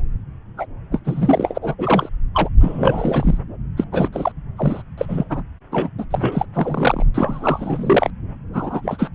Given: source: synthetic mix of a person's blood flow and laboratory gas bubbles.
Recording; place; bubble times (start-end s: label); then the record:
Doppler ultrasound of blood flow; subclavian vein
0.57-0.66 s: bubbles
0.92-1.00 s: bubbles
1.04-1.58 s: bubbles
1.61-1.74 s: bubbles
1.78-2.09 s: bubbles
2.34-2.49 s: bubbles
2.61-3.38 s: bubbles
3.77-3.84 s: bubbles
3.92-4.09 s: bubbles
4.12-4.32 s: bubbles
4.58-4.82 s: bubbles
4.97-5.43 s: bubbles
5.71-5.89 s: bubbles
5.98-6.04 s: bubbles
6.10-6.46 s: bubbles
6.54-7.05 s: bubbles
7.14-8.10 s: bubbles
8.54-9.08 s: bubbles
From the record:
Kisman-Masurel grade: 342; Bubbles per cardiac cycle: rolling drumbeat, 9 or more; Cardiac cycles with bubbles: 100%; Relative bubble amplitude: moderate (0.250 to 0.450); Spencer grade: 3 (all of the cardiac periods contain showers or single bubble signals, but not dominating or overriding the cardiac motion signals); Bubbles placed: anywhere in the cardiac cycle